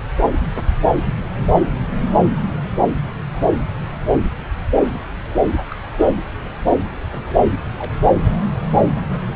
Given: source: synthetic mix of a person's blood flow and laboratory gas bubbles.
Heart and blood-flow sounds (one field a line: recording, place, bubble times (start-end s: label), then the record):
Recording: Doppler ultrasound of blood flow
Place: subclavian vein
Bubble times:
4.37-4.43 s: bubbles
4.77-5.08 s: bubbles
5.69-5.75 s: bubbles
6.00-6.29 s: bubbles
7.10-7.37 s: bubbles
7.78-7.98 s: bubbles
9.03-9.17 s: bubbles
From the record:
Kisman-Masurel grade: 121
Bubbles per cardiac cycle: 1 to 2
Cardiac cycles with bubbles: 10 to 50%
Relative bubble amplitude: barely perceptible (0.100 to 0.250)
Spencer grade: 2 (many but less than half of the cardiac periods contain bubble signals, singularly or in groups)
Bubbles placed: anywhere in the cardiac cycle